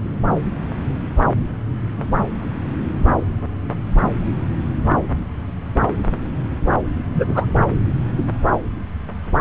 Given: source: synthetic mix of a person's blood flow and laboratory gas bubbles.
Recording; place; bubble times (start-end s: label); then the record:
Doppler ultrasound of blood flow; subclavian vein
7.15-7.25 s: bubbles
7.27-7.46 s: bubbles
From the record:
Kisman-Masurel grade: 113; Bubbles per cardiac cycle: 1 to 2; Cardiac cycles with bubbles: 1 to 10%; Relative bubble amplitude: loud (0.450 to 0.775); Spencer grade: 1 (occasional bubble signal discernible with the cardiac motion signal, with majority of cardiac periods free of bubbles); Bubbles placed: anywhere in the cardiac cycle